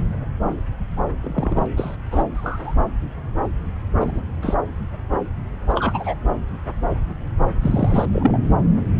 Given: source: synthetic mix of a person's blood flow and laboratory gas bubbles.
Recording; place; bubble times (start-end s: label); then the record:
Doppler ultrasound of blood flow; subclavian vein
1.23-1.67 s: bubbles
1.77-1.96 s: bubbles
2.11-2.23 s: bubbles
2.35-2.75 s: bubbles
4.00-4.21 s: bubbles
4.42-4.55 s: bubbles
5.68-6.15 s: bubbles
7.61-8.05 s: bubbles
8.11-8.38 s: bubbles
From the record:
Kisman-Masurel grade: 122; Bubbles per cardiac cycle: 1 to 2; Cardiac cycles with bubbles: 10 to 50%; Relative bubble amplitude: moderate (0.250 to 0.450); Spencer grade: 2 (many but less than half of the cardiac periods contain bubble signals, singularly or in groups); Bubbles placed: anywhere in the cardiac cycle